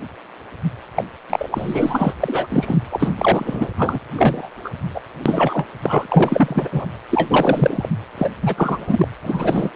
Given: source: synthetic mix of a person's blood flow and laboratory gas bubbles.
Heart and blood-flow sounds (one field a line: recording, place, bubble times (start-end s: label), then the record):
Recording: Doppler ultrasound of blood flow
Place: precordium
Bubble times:
0.95-1.04 s: bubbles
1.29-2.14 s: bubbles
2.20-2.47 s: bubbles
2.50-2.78 s: bubbles
2.90-3.68 s: bubbles
3.77-4.00 s: bubbles
4.15-4.49 s: bubbles
4.64-4.69 s: bubbles
4.94-5.01 s: bubbles
5.25-5.67 s: bubbles
5.83-6.07 s: bubbles
6.11-6.68 s: bubbles
6.71-6.86 s: bubbles
7.10-7.87 s: bubbles
8.17-8.29 s: bubbles
8.41-9.07 s: bubbles
9.23-9.70 s: bubbles
From the record:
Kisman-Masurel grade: 343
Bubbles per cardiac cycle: rolling drumbeat, 9 or more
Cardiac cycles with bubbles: 100%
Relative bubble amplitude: loud (0.450 to 0.775)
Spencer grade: 3 (all of the cardiac periods contain showers or single bubble signals, but not dominating or overriding the cardiac motion signals)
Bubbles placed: anywhere in the cardiac cycle